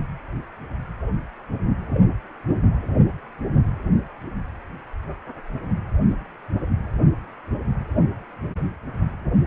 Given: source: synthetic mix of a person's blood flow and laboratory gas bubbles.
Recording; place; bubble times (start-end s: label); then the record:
Doppler ultrasound of blood flow; precordium
1.94-2.00 s: bubbles
From the record:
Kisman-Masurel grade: 111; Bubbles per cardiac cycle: 1 to 2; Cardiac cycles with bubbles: 1 to 10%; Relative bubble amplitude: barely perceptible (0.100 to 0.250); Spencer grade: 1 (occasional bubble signal discernible with the cardiac motion signal, with majority of cardiac periods free of bubbles); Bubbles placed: anywhere in the cardiac cycle